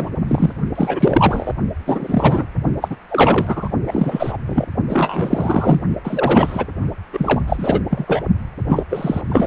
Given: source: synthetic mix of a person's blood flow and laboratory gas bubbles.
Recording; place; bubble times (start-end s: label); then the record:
Doppler ultrasound of blood flow; precordium
0.00-0.10 s: bubbles
0.27-0.53 s: bubbles
0.75-1.53 s: bubbles
1.86-2.45 s: bubbles
2.81-2.96 s: bubbles
3.09-3.69 s: bubbles
3.87-4.38 s: bubbles
4.46-4.66 s: bubbles
4.89-5.83 s: bubbles
6.04-6.66 s: bubbles
7.12-7.42 s: bubbles
7.46-7.80 s: bubbles
7.90-8.23 s: bubbles
8.69-8.83 s: bubbles
8.90-9.21 s: bubbles
9.29-9.47 s: bubbles
From the record:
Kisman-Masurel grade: 343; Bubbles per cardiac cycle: rolling drumbeat, 9 or more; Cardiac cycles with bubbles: 100%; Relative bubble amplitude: loud (0.450 to 0.775); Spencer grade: 3 (all of the cardiac periods contain showers or single bubble signals, but not dominating or overriding the cardiac motion signals); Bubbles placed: only in the low amplitude regions of the cardiac cycle